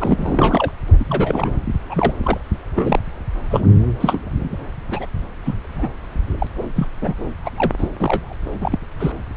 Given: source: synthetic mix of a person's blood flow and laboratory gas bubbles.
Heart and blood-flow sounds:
Doppler ultrasound of blood flow; subclavian vein
0.00-0.72 s: bubbles
1.00-1.04 s: bubbles
1.07-1.51 s: bubbles
1.89-2.13 s: bubbles
2.23-2.38 s: bubbles
2.75-3.00 s: bubbles
3.50-3.61 s: bubbles
4.00-4.21 s: bubbles
4.90-5.06 s: bubbles
5.45-5.54 s: bubbles
5.63-5.90 s: bubbles
6.38-6.46 s: bubbles
6.75-6.87 s: bubbles
7.01-7.14 s: bubbles
7.43-7.50 s: bubbles
7.57-7.72 s: bubbles
7.77-7.88 s: bubbles
7.99-8.34 s: bubbles
8.60-8.79 s: bubbles
8.99-9.13 s: bubbles
From the record:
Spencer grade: 3 (all of the cardiac periods contain showers or single bubble signals, but not dominating or overriding the cardiac motion signals); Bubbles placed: anywhere in the cardiac cycle

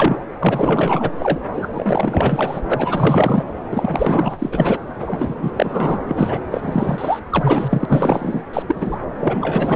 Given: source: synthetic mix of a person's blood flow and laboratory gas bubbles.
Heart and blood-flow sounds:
Doppler ultrasound of blood flow; subclavian vein
0.00-0.22 s: bubbles
0.40-1.11 s: bubbles
1.19-1.40 s: bubbles
1.53-1.69 s: bubbles
1.73-2.61 s: bubbles
2.72-3.44 s: bubbles
3.71-4.78 s: bubbles
5.02-5.51 s: bubbles
5.56-5.99 s: bubbles
6.07-6.38 s: bubbles
6.50-7.19 s: bubbles
7.30-7.86 s: bubbles
7.88-8.43 s: bubbles
8.53-8.62 s: bubbles
8.67-8.98 s: bubbles
9.19-9.76 s: bubbles
From the record:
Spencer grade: 4 (maximum detectable bubble signal sounding continuously throughout systole and diastole of every cardiac period, and overriding the amplitude of the normal cardiac signals); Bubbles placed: anywhere in the cardiac cycle

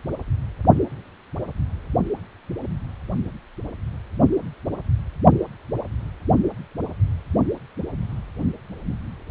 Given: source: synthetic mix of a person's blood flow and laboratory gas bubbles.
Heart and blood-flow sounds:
Doppler ultrasound of blood flow; precordium
no bubbles
From the record:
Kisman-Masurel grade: 000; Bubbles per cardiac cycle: 0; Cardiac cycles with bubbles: 0%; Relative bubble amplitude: no bubbles discernible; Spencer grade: 0 (complete lack of bubble signals)

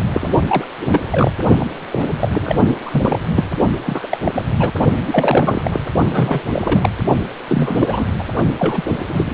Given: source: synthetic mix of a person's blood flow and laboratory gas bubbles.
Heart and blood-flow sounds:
Doppler ultrasound of blood flow; precordium
0.06-0.40 s: bubbles
0.47-0.65 s: bubbles
0.78-1.01 s: bubbles
1.10-1.31 s: bubbles
1.59-1.66 s: bubbles
1.91-2.06 s: bubbles
2.21-2.29 s: bubbles
2.32-2.76 s: bubbles
2.86-3.19 s: bubbles
3.36-3.45 s: bubbles
3.85-4.07 s: bubbles
4.10-4.17 s: bubbles
4.24-4.32 s: bubbles
4.34-4.42 s: bubbles
4.56-4.71 s: bubbles
5.07-5.80 s: bubbles
6.09-6.42 s: bubbles
6.53-6.90 s: bubbles
7.48-8.05 s: bubbles
8.18-8.23 s: bubbles
8.59-8.83 s: bubbles
8.88-8.96 s: bubbles
9.07-9.34 s: bubbles
From the record:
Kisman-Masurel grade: 342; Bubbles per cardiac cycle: rolling drumbeat, 9 or more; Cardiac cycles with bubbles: 100%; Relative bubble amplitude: moderate (0.250 to 0.450); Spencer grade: 3 (all of the cardiac periods contain showers or single bubble signals, but not dominating or overriding the cardiac motion signals); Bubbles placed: only in the low amplitude regions of the cardiac cycle

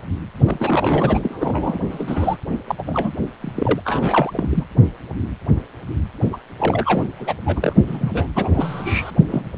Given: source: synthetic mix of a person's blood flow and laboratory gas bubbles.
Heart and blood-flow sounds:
Doppler ultrasound of blood flow; precordium
0.46-1.20 s: bubbles
1.23-1.79 s: bubbles
1.90-2.38 s: bubbles
2.67-2.75 s: bubbles
2.78-3.12 s: bubbles
3.40-3.81 s: bubbles
3.85-4.63 s: bubbles
6.32-6.37 s: bubbles
6.59-7.04 s: bubbles
7.17-7.33 s: bubbles
7.46-7.74 s: bubbles
7.87-8.27 s: bubbles
8.35-9.12 s: bubbles
9.27-9.48 s: bubbles
From the record:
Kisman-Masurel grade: 332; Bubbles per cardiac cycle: rolling drumbeat, 9 or more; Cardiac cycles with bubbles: 50 to 99%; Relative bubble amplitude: moderate (0.250 to 0.450); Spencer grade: 3 (all of the cardiac periods contain showers or single bubble signals, but not dominating or overriding the cardiac motion signals); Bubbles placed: only in the low amplitude regions of the cardiac cycle

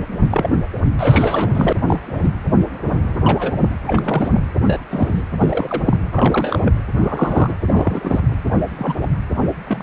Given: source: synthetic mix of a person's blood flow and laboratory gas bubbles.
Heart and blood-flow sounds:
Doppler ultrasound of blood flow; precordium
0.00-0.03 s: bubbles
0.30-0.56 s: bubbles
0.98-1.73 s: bubbles
1.86-2.30 s: bubbles
3.25-3.55 s: bubbles
3.57-3.73 s: bubbles
3.87-4.44 s: bubbles
4.61-4.79 s: bubbles
4.90-5.23 s: bubbles
5.40-5.97 s: bubbles
6.10-6.73 s: bubbles
6.95-7.55 s: bubbles
7.65-8.20 s: bubbles
8.77-8.97 s: bubbles
9.02-9.08 s: bubbles
9.65-9.83 s: bubbles
From the record:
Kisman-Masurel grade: 232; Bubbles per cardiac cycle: several, 3 to 8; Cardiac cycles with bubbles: 50 to 99%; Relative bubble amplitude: moderate (0.250 to 0.450); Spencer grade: 3 (all of the cardiac periods contain showers or single bubble signals, but not dominating or overriding the cardiac motion signals); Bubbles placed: anywhere in the cardiac cycle

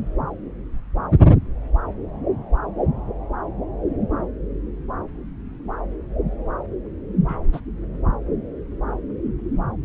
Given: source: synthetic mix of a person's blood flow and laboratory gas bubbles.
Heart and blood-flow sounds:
Doppler ultrasound of blood flow; subclavian vein
7.29-7.37 s: bubbles
7.52-7.60 s: bubbles
From the record:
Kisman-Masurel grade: 111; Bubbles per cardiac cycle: 1 to 2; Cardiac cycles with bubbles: 1 to 10%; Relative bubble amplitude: barely perceptible (0.100 to 0.250); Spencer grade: 1 (occasional bubble signal discernible with the cardiac motion signal, with majority of cardiac periods free of bubbles); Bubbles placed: anywhere in the cardiac cycle

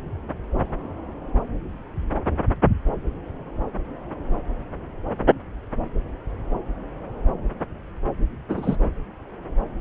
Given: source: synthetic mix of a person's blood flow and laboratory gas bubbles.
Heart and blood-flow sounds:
Doppler ultrasound of blood flow; subclavian vein
8.49-8.77 s: bubbles
From the record:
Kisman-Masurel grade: 113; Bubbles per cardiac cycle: 1 to 2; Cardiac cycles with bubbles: 1 to 10%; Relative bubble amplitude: loud (0.450 to 0.775); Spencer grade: 1 (occasional bubble signal discernible with the cardiac motion signal, with majority of cardiac periods free of bubbles); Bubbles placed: anywhere in the cardiac cycle

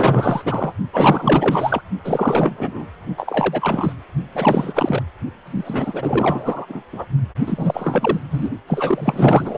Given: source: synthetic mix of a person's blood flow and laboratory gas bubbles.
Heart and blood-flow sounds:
Doppler ultrasound of blood flow; precordium
0.00-0.72 s: bubbles
0.93-1.81 s: bubbles
2.04-2.85 s: bubbles
3.18-3.92 s: bubbles
4.34-5.03 s: bubbles
5.46-6.66 s: bubbles
6.68-6.83 s: bubbles
6.92-7.05 s: bubbles
7.46-8.20 s: bubbles
8.30-8.49 s: bubbles
8.67-9.58 s: bubbles
From the record:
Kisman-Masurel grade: 444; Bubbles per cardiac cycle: continuous sound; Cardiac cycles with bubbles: 100%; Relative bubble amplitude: maximal (0.775 to 0.999); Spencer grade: 4 (maximum detectable bubble signal sounding continuously throughout systole and diastole of every cardiac period, and overriding the amplitude of the normal cardiac signals); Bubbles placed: only in the low amplitude regions of the cardiac cycle

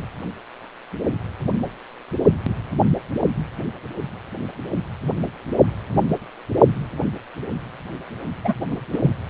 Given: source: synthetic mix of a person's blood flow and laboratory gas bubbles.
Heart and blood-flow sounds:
Doppler ultrasound of blood flow; precordium
8.44-8.53 s: bubbles
8.71-8.76 s: bubbles
8.92-8.99 s: bubbles
9.02-9.12 s: bubbles
From the record:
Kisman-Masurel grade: 212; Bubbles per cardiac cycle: several, 3 to 8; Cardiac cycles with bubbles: 1 to 10%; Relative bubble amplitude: moderate (0.250 to 0.450); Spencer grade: 1 (occasional bubble signal discernible with the cardiac motion signal, with majority of cardiac periods free of bubbles); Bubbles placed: only in the low amplitude regions of the cardiac cycle

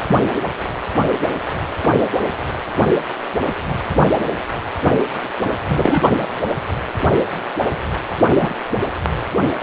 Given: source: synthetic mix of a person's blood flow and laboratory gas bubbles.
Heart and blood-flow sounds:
Doppler ultrasound of blood flow; precordium
0.02-0.17 s: bubbles
5.68-6.08 s: bubbles
8.35-8.53 s: bubbles
From the record:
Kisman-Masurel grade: 123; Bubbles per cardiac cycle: 1 to 2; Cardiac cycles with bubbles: 10 to 50%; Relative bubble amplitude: loud (0.450 to 0.775); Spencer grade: 2 (many but less than half of the cardiac periods contain bubble signals, singularly or in groups); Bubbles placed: anywhere in the cardiac cycle

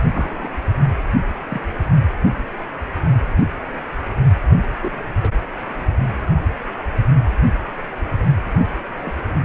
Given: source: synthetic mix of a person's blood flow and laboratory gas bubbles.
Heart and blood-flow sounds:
Doppler ultrasound of blood flow; precordium
0.14-0.51 s: bubbles
1.49-1.62 s: bubbles
4.82-5.03 s: bubbles
5.21-5.31 s: bubbles
8.99-9.19 s: bubbles
From the record:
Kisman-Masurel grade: 122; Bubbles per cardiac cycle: 1 to 2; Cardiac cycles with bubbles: 10 to 50%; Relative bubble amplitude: moderate (0.250 to 0.450); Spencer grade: 2 (many but less than half of the cardiac periods contain bubble signals, singularly or in groups); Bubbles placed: only in the low amplitude regions of the cardiac cycle

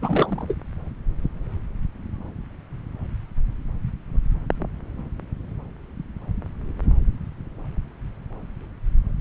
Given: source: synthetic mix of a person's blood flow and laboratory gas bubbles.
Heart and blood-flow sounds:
Doppler ultrasound of blood flow; subclavian vein
0.02-0.55 s: bubbles
From the record:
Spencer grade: 2 (many but less than half of the cardiac periods contain bubble signals, singularly or in groups); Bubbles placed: anywhere in the cardiac cycle

